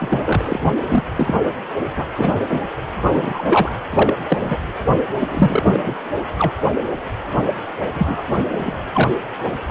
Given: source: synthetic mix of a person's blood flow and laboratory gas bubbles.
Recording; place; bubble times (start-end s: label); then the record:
Doppler ultrasound of blood flow; precordium
0.00-0.22 s: bubbles
0.26-0.59 s: bubbles
0.90-1.03 s: bubbles
1.16-1.35 s: bubbles
1.96-2.05 s: bubbles
2.15-2.41 s: bubbles
2.44-2.60 s: bubbles
3.04-3.44 s: bubbles
3.46-3.72 s: bubbles
3.92-4.14 s: bubbles
4.28-4.57 s: bubbles
5.20-5.95 s: bubbles
6.38-6.53 s: bubbles
7.94-8.23 s: bubbles
8.52-8.79 s: bubbles
8.93-9.09 s: bubbles
From the record:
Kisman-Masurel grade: 243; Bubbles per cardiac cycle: several, 3 to 8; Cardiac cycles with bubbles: 100%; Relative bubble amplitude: loud (0.450 to 0.775); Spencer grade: 3 (all of the cardiac periods contain showers or single bubble signals, but not dominating or overriding the cardiac motion signals); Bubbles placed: anywhere in the cardiac cycle